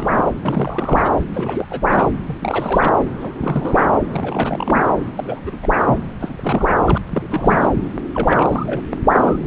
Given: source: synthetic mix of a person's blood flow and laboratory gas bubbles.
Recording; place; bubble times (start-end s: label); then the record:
Doppler ultrasound of blood flow; subclavian vein
0.00-0.23 s: bubbles
0.42-1.11 s: bubbles
1.34-1.65 s: bubbles
1.69-1.81 s: bubbles
1.89-2.07 s: bubbles
2.26-2.94 s: bubbles
2.98-3.05 s: bubbles
3.19-3.32 s: bubbles
3.41-3.86 s: bubbles
4.12-4.81 s: bubbles
5.16-5.40 s: bubbles
5.46-5.57 s: bubbles
5.62-5.67 s: bubbles
5.73-5.97 s: bubbles
6.20-6.67 s: bubbles
6.86-6.98 s: bubbles
7.12-7.69 s: bubbles
8.13-8.81 s: bubbles
8.90-8.97 s: bubbles
9.09-9.37 s: bubbles
From the record:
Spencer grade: 3 (all of the cardiac periods contain showers or single bubble signals, but not dominating or overriding the cardiac motion signals); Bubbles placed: anywhere in the cardiac cycle